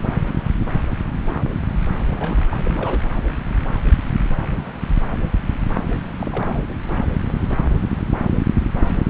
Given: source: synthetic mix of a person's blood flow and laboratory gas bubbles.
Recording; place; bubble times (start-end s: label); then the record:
Doppler ultrasound of blood flow; subclavian vein
2.10-2.61 s: bubbles
2.64-3.12 s: bubbles
6.19-6.62 s: bubbles
6.69-6.77 s: bubbles
From the record:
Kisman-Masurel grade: 221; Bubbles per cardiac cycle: several, 3 to 8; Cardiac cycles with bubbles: 10 to 50%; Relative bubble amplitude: barely perceptible (0.100 to 0.250); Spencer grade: 2 (many but less than half of the cardiac periods contain bubble signals, singularly or in groups); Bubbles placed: anywhere in the cardiac cycle